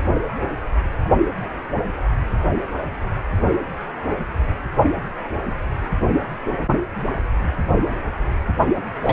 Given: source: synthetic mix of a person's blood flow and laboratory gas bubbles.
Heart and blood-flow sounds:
Doppler ultrasound of blood flow; precordium
9.02-9.12 s: bubbles
From the record:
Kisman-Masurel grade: 113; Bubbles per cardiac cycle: 1 to 2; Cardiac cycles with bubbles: 1 to 10%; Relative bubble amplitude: loud (0.450 to 0.775); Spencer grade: 1 (occasional bubble signal discernible with the cardiac motion signal, with majority of cardiac periods free of bubbles); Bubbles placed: anywhere in the cardiac cycle

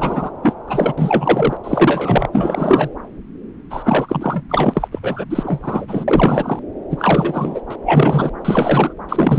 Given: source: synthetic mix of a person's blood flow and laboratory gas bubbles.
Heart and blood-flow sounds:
Doppler ultrasound of blood flow; subclavian vein
0.00-0.30 s: bubbles
0.42-0.54 s: bubbles
0.67-0.94 s: bubbles
0.98-1.57 s: bubbles
1.64-2.27 s: bubbles
2.33-2.90 s: bubbles
3.70-4.42 s: bubbles
4.49-4.88 s: bubbles
4.92-4.99 s: bubbles
5.03-5.25 s: bubbles
5.29-6.59 s: bubbles
6.90-7.61 s: bubbles
7.70-7.76 s: bubbles
7.85-8.29 s: bubbles
8.44-8.93 s: bubbles
9.08-9.39 s: bubbles
From the record:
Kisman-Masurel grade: 333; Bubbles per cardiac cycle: rolling drumbeat, 9 or more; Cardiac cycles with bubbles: 50 to 99%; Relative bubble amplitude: loud (0.450 to 0.775); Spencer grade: 3 (all of the cardiac periods contain showers or single bubble signals, but not dominating or overriding the cardiac motion signals); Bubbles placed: anywhere in the cardiac cycle

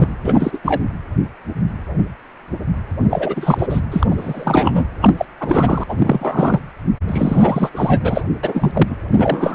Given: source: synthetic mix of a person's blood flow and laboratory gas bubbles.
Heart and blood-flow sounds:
Doppler ultrasound of blood flow; precordium
0.00-0.09 s: bubbles
0.23-0.58 s: bubbles
0.64-0.81 s: bubbles
3.10-3.67 s: bubbles
3.69-3.80 s: bubbles
3.91-4.07 s: bubbles
4.11-4.86 s: bubbles
5.00-5.14 s: bubbles
5.17-5.25 s: bubbles
5.40-5.83 s: bubbles
5.88-6.60 s: bubbles
7.07-7.70 s: bubbles
7.72-8.23 s: bubbles
8.43-8.95 s: bubbles
9.12-9.54 s: bubbles
From the record:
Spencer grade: 3 (all of the cardiac periods contain showers or single bubble signals, but not dominating or overriding the cardiac motion signals); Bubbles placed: anywhere in the cardiac cycle

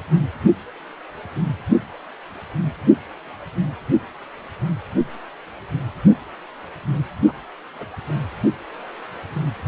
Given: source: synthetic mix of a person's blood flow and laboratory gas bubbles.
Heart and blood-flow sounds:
Doppler ultrasound of blood flow; precordium
7.25-7.33 s: bubbles
7.79-7.88 s: bubbles
From the record:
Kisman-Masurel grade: 111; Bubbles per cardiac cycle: 1 to 2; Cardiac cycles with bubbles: 1 to 10%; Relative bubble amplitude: barely perceptible (0.100 to 0.250); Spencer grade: 1 (occasional bubble signal discernible with the cardiac motion signal, with majority of cardiac periods free of bubbles); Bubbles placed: anywhere in the cardiac cycle

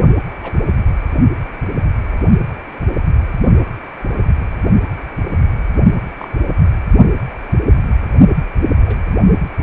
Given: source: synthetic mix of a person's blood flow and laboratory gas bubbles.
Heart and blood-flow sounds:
Doppler ultrasound of blood flow; precordium
0.43-0.58 s: bubbles
6.18-6.28 s: bubbles
8.86-8.97 s: bubbles
9.61-9.63 s: bubbles
From the record:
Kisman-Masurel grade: 121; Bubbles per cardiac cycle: 1 to 2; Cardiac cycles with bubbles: 10 to 50%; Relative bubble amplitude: barely perceptible (0.100 to 0.250); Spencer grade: 2 (many but less than half of the cardiac periods contain bubble signals, singularly or in groups); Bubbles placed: only in the low amplitude regions of the cardiac cycle

